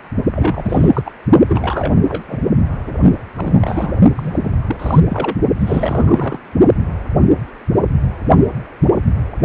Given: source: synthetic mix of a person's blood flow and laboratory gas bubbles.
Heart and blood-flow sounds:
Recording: Doppler ultrasound of blood flow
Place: precordium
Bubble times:
0.35-1.11 s: bubbles
1.49-1.95 s: bubbles
2.03-2.24 s: bubbles
2.28-2.41 s: bubbles
2.87-2.93 s: bubbles
3.02-3.10 s: bubbles
3.35-3.96 s: bubbles
4.15-4.51 s: bubbles
4.67-4.76 s: bubbles
4.79-5.00 s: bubbles
5.09-5.37 s: bubbles
5.60-6.38 s: bubbles
From the record:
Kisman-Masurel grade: 332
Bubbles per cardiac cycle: rolling drumbeat, 9 or more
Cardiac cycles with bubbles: 50 to 99%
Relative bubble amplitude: moderate (0.250 to 0.450)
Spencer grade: 3 (all of the cardiac periods contain showers or single bubble signals, but not dominating or overriding the cardiac motion signals)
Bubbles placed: only in the low amplitude regions of the cardiac cycle

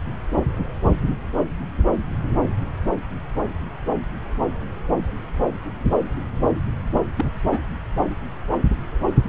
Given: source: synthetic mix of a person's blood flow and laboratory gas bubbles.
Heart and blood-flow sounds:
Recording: Doppler ultrasound of blood flow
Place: subclavian vein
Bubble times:
7.18-7.60 s: bubbles
From the record:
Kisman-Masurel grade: 212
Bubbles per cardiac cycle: several, 3 to 8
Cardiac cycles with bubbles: 1 to 10%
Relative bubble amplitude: moderate (0.250 to 0.450)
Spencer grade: 1 (occasional bubble signal discernible with the cardiac motion signal, with majority of cardiac periods free of bubbles)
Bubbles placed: anywhere in the cardiac cycle

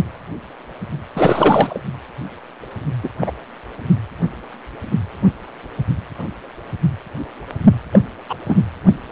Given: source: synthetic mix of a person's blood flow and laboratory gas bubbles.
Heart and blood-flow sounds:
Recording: Doppler ultrasound of blood flow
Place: precordium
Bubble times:
1.15-1.81 s: bubbles
3.03-3.08 s: bubbles
3.20-3.32 s: bubbles
7.92-8.00 s: bubbles
8.29-8.35 s: bubbles
8.47-8.56 s: bubbles
From the record:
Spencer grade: 2 (many but less than half of the cardiac periods contain bubble signals, singularly or in groups)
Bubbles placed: only in the low amplitude regions of the cardiac cycle

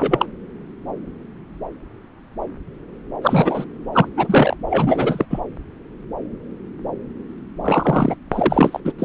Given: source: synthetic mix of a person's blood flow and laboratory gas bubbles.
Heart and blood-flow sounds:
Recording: Doppler ultrasound of blood flow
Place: subclavian vein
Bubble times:
0.00-0.26 s: bubbles
3.21-3.65 s: bubbles
3.92-4.08 s: bubbles
4.17-4.55 s: bubbles
4.67-5.25 s: bubbles
5.29-5.39 s: bubbles
7.63-8.16 s: bubbles
8.31-8.80 s: bubbles
8.85-8.92 s: bubbles
8.99-9.05 s: bubbles
From the record:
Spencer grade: 3 (all of the cardiac periods contain showers or single bubble signals, but not dominating or overriding the cardiac motion signals)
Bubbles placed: anywhere in the cardiac cycle

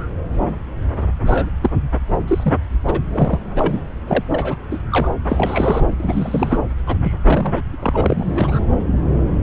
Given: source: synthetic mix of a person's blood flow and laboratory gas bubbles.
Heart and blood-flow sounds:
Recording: Doppler ultrasound of blood flow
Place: subclavian vein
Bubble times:
1.26-1.50 s: bubbles
1.61-1.69 s: bubbles
2.27-2.54 s: bubbles
2.86-3.00 s: bubbles
3.11-3.38 s: bubbles
3.56-3.81 s: bubbles
4.07-4.25 s: bubbles
4.28-4.58 s: bubbles
4.71-4.79 s: bubbles
4.90-5.10 s: bubbles
5.29-5.97 s: bubbles
6.00-6.58 s: bubbles
6.86-6.97 s: bubbles
7.03-7.13 s: bubbles
7.24-7.62 s: bubbles
7.79-8.59 s: bubbles
From the record:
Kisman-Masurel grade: 232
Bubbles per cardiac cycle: several, 3 to 8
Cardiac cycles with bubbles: 50 to 99%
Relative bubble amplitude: moderate (0.250 to 0.450)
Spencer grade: 3 (all of the cardiac periods contain showers or single bubble signals, but not dominating or overriding the cardiac motion signals)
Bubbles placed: anywhere in the cardiac cycle

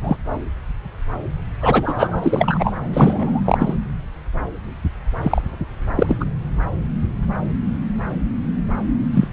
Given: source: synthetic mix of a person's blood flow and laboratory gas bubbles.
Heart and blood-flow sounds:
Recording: Doppler ultrasound of blood flow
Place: subclavian vein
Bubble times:
0.04-0.17 s: bubbles
1.61-2.74 s: bubbles
2.93-3.41 s: bubbles
3.44-3.73 s: bubbles
5.22-5.42 s: bubbles
5.96-6.16 s: bubbles
6.20-6.25 s: bubbles
9.13-9.27 s: bubbles
From the record:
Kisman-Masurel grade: 223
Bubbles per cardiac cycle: several, 3 to 8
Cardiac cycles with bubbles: 10 to 50%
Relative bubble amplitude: loud (0.450 to 0.775)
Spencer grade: 2 (many but less than half of the cardiac periods contain bubble signals, singularly or in groups)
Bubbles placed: anywhere in the cardiac cycle

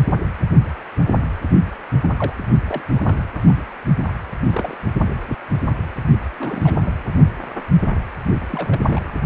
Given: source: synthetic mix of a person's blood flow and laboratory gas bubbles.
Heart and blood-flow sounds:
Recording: Doppler ultrasound of blood flow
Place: precordium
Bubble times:
2.02-2.10 s: bubbles
2.19-2.33 s: bubbles
2.68-2.82 s: bubbles
2.91-3.23 s: bubbles
3.34-3.38 s: bubbles
3.48-3.54 s: bubbles
3.57-3.65 s: bubbles
4.06-4.12 s: bubbles
4.49-4.76 s: bubbles
6.40-6.95 s: bubbles
8.51-9.11 s: bubbles
From the record:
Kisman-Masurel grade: 221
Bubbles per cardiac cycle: several, 3 to 8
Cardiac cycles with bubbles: 10 to 50%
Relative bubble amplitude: barely perceptible (0.100 to 0.250)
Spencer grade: 2 (many but less than half of the cardiac periods contain bubble signals, singularly or in groups)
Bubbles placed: only in the low amplitude regions of the cardiac cycle

